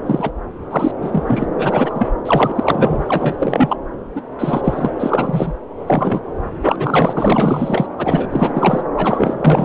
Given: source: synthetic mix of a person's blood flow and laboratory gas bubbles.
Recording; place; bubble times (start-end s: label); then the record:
Doppler ultrasound of blood flow; subclavian vein
0.06-0.32 s: bubbles
0.71-0.92 s: bubbles
1.02-1.23 s: bubbles
1.27-1.47 s: bubbles
1.57-2.10 s: bubbles
2.25-3.03 s: bubbles
3.08-3.35 s: bubbles
3.39-3.77 s: bubbles
4.15-4.22 s: bubbles
4.38-4.62 s: bubbles
4.64-4.91 s: bubbles
5.00-5.53 s: bubbles
5.87-6.20 s: bubbles
6.62-7.86 s: bubbles
7.98-8.27 s: bubbles
8.30-8.82 s: bubbles
8.96-9.65 s: bubbles
From the record:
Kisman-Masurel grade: 444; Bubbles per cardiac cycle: continuous sound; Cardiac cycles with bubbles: 100%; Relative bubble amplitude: maximal (0.775 to 0.999); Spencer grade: 4 (maximum detectable bubble signal sounding continuously throughout systole and diastole of every cardiac period, and overriding the amplitude of the normal cardiac signals); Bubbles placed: anywhere in the cardiac cycle